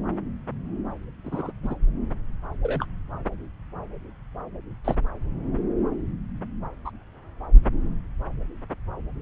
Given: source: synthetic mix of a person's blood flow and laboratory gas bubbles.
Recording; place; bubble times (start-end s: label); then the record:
Doppler ultrasound of blood flow; subclavian vein
1.24-1.51 s: bubbles
1.63-1.75 s: bubbles
2.62-2.85 s: bubbles
4.84-4.99 s: bubbles
6.85-6.91 s: bubbles
From the record:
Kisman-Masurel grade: 121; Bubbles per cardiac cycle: 1 to 2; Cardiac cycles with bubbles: 10 to 50%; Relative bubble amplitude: barely perceptible (0.100 to 0.250); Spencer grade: 2 (many but less than half of the cardiac periods contain bubble signals, singularly or in groups); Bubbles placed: anywhere in the cardiac cycle